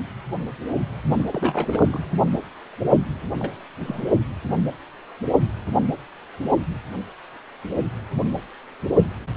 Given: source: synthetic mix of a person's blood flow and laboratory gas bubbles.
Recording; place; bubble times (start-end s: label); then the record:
Doppler ultrasound of blood flow; precordium
1.11-1.24 s: bubbles
1.27-2.10 s: bubbles
3.39-3.54 s: bubbles
3.80-4.08 s: bubbles
From the record:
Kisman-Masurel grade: 221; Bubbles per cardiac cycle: several, 3 to 8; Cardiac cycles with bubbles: 10 to 50%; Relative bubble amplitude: barely perceptible (0.100 to 0.250); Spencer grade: 2 (many but less than half of the cardiac periods contain bubble signals, singularly or in groups); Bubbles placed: anywhere in the cardiac cycle